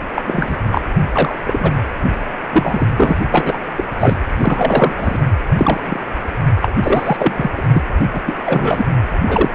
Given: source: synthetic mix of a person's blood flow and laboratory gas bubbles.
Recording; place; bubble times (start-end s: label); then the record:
Doppler ultrasound of blood flow; precordium
0.14-0.22 s: bubbles
0.26-0.57 s: bubbles
0.71-0.81 s: bubbles
1.12-1.35 s: bubbles
1.46-1.73 s: bubbles
2.52-2.87 s: bubbles
2.96-3.20 s: bubbles
3.31-3.58 s: bubbles
3.76-4.17 s: bubbles
4.38-5.18 s: bubbles
5.57-5.80 s: bubbles
5.86-6.00 s: bubbles
6.62-6.68 s: bubbles
6.83-7.50 s: bubbles
7.57-7.62 s: bubbles
7.72-7.82 s: bubbles
8.13-8.21 s: bubbles
8.25-8.37 s: bubbles
8.46-8.86 s: bubbles
9.27-9.50 s: bubbles
From the record:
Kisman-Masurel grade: 243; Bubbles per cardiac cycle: several, 3 to 8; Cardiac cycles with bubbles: 100%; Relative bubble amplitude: loud (0.450 to 0.775); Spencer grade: 3 (all of the cardiac periods contain showers or single bubble signals, but not dominating or overriding the cardiac motion signals); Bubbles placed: anywhere in the cardiac cycle